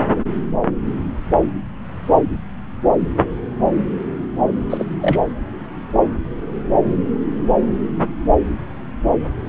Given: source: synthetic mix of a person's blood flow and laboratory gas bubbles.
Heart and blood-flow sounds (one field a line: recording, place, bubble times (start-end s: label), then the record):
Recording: Doppler ultrasound of blood flow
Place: subclavian vein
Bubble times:
4.70-4.85 s: bubbles
5.00-5.21 s: bubbles
From the record:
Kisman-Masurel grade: 212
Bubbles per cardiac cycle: several, 3 to 8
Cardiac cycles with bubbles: 1 to 10%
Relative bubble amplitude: moderate (0.250 to 0.450)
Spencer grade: 1 (occasional bubble signal discernible with the cardiac motion signal, with majority of cardiac periods free of bubbles)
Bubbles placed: anywhere in the cardiac cycle